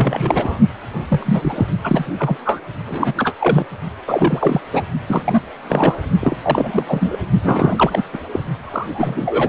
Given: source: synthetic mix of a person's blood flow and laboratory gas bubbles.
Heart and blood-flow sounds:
Doppler ultrasound of blood flow; precordium
0.00-0.59 s: bubbles
1.08-1.66 s: bubbles
1.83-2.06 s: bubbles
2.18-2.37 s: bubbles
2.45-2.60 s: bubbles
2.87-3.14 s: bubbles
3.17-3.33 s: bubbles
3.40-3.65 s: bubbles
4.06-4.61 s: bubbles
4.73-4.83 s: bubbles
5.07-5.42 s: bubbles
5.69-5.95 s: bubbles
6.21-6.38 s: bubbles
6.43-6.83 s: bubbles
6.86-7.17 s: bubbles
7.42-8.02 s: bubbles
8.13-8.21 s: bubbles
8.32-8.39 s: bubbles
8.63-9.49 s: bubbles
From the record:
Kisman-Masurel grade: 343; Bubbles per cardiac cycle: rolling drumbeat, 9 or more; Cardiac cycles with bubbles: 100%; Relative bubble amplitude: loud (0.450 to 0.775); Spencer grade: 3 (all of the cardiac periods contain showers or single bubble signals, but not dominating or overriding the cardiac motion signals); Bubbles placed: only in the low amplitude regions of the cardiac cycle

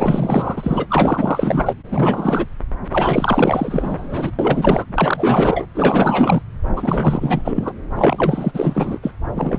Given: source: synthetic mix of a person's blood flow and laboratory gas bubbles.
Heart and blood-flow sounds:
Doppler ultrasound of blood flow; subclavian vein
0.00-1.74 s: bubbles
1.92-2.46 s: bubbles
2.90-4.31 s: bubbles
4.39-4.86 s: bubbles
4.95-5.66 s: bubbles
5.74-6.42 s: bubbles
6.76-7.72 s: bubbles
7.95-8.98 s: bubbles
9.03-9.11 s: bubbles
9.35-9.59 s: bubbles
From the record:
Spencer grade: 4 (maximum detectable bubble signal sounding continuously throughout systole and diastole of every cardiac period, and overriding the amplitude of the normal cardiac signals); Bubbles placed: anywhere in the cardiac cycle

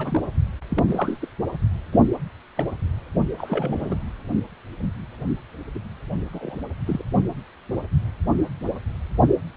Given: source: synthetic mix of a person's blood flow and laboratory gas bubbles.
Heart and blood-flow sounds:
Doppler ultrasound of blood flow; precordium
0.00-0.21 s: bubbles
0.70-1.19 s: bubbles
1.21-1.28 s: bubbles
1.92-2.00 s: bubbles
2.56-2.64 s: bubbles
3.38-3.96 s: bubbles
5.75-5.79 s: bubbles
6.32-6.57 s: bubbles
6.86-7.03 s: bubbles
From the record:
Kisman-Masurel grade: 221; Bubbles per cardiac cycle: several, 3 to 8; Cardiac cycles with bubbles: 10 to 50%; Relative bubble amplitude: barely perceptible (0.100 to 0.250); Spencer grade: 2 (many but less than half of the cardiac periods contain bubble signals, singularly or in groups); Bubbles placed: anywhere in the cardiac cycle

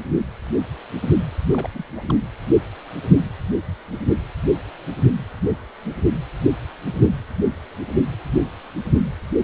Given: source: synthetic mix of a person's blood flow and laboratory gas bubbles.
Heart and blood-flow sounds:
Doppler ultrasound of blood flow; precordium
1.52-1.70 s: bubbles
1.73-1.83 s: bubbles
1.96-2.04 s: bubbles
2.10-2.15 s: bubbles
From the record:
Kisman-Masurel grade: 211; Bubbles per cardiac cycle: several, 3 to 8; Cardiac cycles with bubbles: 1 to 10%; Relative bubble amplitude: barely perceptible (0.100 to 0.250); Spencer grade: 1 (occasional bubble signal discernible with the cardiac motion signal, with majority of cardiac periods free of bubbles); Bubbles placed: anywhere in the cardiac cycle

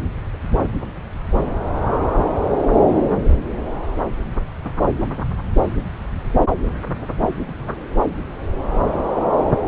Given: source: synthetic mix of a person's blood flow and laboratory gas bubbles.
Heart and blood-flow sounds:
Doppler ultrasound of blood flow; subclavian vein
7.20-7.29 s: bubbles
7.35-7.41 s: bubbles
7.47-7.54 s: bubbles
7.67-7.72 s: bubbles
From the record:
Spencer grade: 1 (occasional bubble signal discernible with the cardiac motion signal, with majority of cardiac periods free of bubbles); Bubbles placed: anywhere in the cardiac cycle

